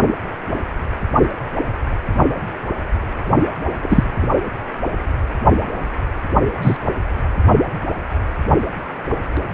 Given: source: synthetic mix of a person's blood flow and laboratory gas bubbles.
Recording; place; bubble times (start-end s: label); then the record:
Doppler ultrasound of blood flow; precordium
3.82-4.27 s: bubbles
6.62-6.77 s: bubbles
From the record:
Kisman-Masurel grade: 123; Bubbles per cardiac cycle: 1 to 2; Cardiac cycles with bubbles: 10 to 50%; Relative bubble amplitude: loud (0.450 to 0.775); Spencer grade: 2 (many but less than half of the cardiac periods contain bubble signals, singularly or in groups); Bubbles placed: only in the low amplitude regions of the cardiac cycle